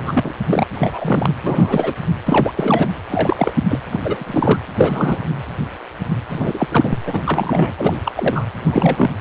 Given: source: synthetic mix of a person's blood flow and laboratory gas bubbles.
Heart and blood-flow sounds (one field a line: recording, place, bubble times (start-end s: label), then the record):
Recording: Doppler ultrasound of blood flow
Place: precordium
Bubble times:
0.00-0.33 s: bubbles
0.47-0.64 s: bubbles
0.74-1.35 s: bubbles
1.43-1.94 s: bubbles
2.25-2.52 s: bubbles
2.56-2.89 s: bubbles
3.10-3.53 s: bubbles
3.69-3.80 s: bubbles
3.92-4.00 s: bubbles
4.04-4.59 s: bubbles
4.75-5.21 s: bubbles
6.29-6.67 s: bubbles
6.71-6.96 s: bubbles
7.07-7.72 s: bubbles
7.77-7.99 s: bubbles
8.04-8.12 s: bubbles
8.16-8.46 s: bubbles
8.54-9.11 s: bubbles
From the record:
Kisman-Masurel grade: 333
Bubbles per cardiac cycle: rolling drumbeat, 9 or more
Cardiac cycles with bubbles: 50 to 99%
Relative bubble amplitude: loud (0.450 to 0.775)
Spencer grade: 3 (all of the cardiac periods contain showers or single bubble signals, but not dominating or overriding the cardiac motion signals)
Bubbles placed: anywhere in the cardiac cycle